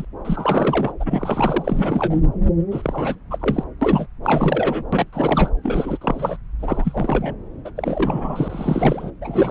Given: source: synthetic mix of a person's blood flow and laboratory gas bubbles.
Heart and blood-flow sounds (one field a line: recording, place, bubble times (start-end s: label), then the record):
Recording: Doppler ultrasound of blood flow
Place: subclavian vein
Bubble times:
0.00-0.05 s: bubbles
0.24-0.92 s: bubbles
1.00-2.22 s: bubbles
2.70-3.15 s: bubbles
3.30-3.63 s: bubbles
3.81-4.07 s: bubbles
4.23-4.83 s: bubbles
4.93-5.05 s: bubbles
5.12-5.50 s: bubbles
5.63-5.98 s: bubbles
6.01-6.37 s: bubbles
6.59-7.36 s: bubbles
7.65-7.71 s: bubbles
7.77-9.11 s: bubbles
9.21-9.51 s: bubbles
From the record:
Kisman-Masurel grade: 343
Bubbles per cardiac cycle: rolling drumbeat, 9 or more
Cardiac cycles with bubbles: 100%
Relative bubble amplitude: loud (0.450 to 0.775)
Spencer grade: 3 (all of the cardiac periods contain showers or single bubble signals, but not dominating or overriding the cardiac motion signals)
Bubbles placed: anywhere in the cardiac cycle